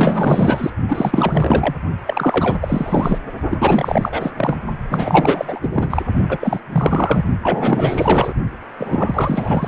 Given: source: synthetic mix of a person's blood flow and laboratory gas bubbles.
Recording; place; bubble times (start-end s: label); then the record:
Doppler ultrasound of blood flow; precordium
0.00-0.71 s: bubbles
0.88-1.74 s: bubbles
2.06-2.58 s: bubbles
2.61-3.19 s: bubbles
3.50-4.31 s: bubbles
4.37-4.57 s: bubbles
4.91-5.59 s: bubbles
5.62-5.69 s: bubbles
5.72-6.03 s: bubbles
6.29-6.61 s: bubbles
6.72-7.23 s: bubbles
7.42-8.33 s: bubbles
8.78-9.68 s: bubbles
From the record:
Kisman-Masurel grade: 444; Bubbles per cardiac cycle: continuous sound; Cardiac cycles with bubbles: 100%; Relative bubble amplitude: maximal (0.775 to 0.999); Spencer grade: 4 (maximum detectable bubble signal sounding continuously throughout systole and diastole of every cardiac period, and overriding the amplitude of the normal cardiac signals); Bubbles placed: only in the low amplitude regions of the cardiac cycle